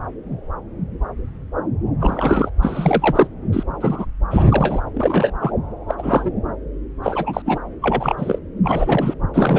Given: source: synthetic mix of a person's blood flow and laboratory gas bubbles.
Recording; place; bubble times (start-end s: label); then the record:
Doppler ultrasound of blood flow; subclavian vein
2.00-2.50 s: bubbles
2.62-3.27 s: bubbles
3.52-3.63 s: bubbles
3.81-4.05 s: bubbles
4.30-4.45 s: bubbles
4.50-4.81 s: bubbles
4.96-5.31 s: bubbles
5.40-5.53 s: bubbles
5.88-5.95 s: bubbles
5.98-6.30 s: bubbles
7.03-7.42 s: bubbles
7.46-7.60 s: bubbles
7.82-8.38 s: bubbles
8.63-9.14 s: bubbles
9.34-9.58 s: bubbles
From the record:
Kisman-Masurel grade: 232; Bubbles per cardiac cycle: several, 3 to 8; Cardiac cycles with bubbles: 50 to 99%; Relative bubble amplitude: moderate (0.250 to 0.450); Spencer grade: 3 (all of the cardiac periods contain showers or single bubble signals, but not dominating or overriding the cardiac motion signals); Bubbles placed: anywhere in the cardiac cycle